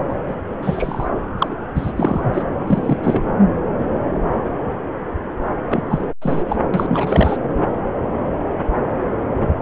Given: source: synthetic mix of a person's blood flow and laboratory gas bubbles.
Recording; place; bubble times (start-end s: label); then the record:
Doppler ultrasound of blood flow; subclavian vein
0.10-0.14 s: bubbles
0.28-0.36 s: bubbles
0.61-1.09 s: bubbles
1.38-1.55 s: bubbles
1.75-1.92 s: bubbles
1.96-2.42 s: bubbles
2.67-2.98 s: bubbles
3.03-3.23 s: bubbles
5.68-6.08 s: bubbles
6.21-6.45 s: bubbles
6.47-6.56 s: bubbles
6.74-7.37 s: bubbles
From the record:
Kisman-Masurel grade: 232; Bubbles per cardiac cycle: several, 3 to 8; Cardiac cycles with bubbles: 50 to 99%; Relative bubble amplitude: moderate (0.250 to 0.450); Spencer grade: 3 (all of the cardiac periods contain showers or single bubble signals, but not dominating or overriding the cardiac motion signals); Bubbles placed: anywhere in the cardiac cycle